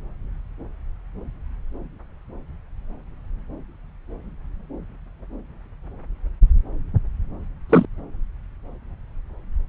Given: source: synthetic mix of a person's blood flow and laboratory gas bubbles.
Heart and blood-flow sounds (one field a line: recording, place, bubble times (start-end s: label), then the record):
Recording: Doppler ultrasound of blood flow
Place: subclavian vein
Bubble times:
7.69-7.86 s: bubbles
From the record:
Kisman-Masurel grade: 213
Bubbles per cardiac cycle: several, 3 to 8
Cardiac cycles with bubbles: 1 to 10%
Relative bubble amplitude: loud (0.450 to 0.775)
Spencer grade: 1 (occasional bubble signal discernible with the cardiac motion signal, with majority of cardiac periods free of bubbles)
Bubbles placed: anywhere in the cardiac cycle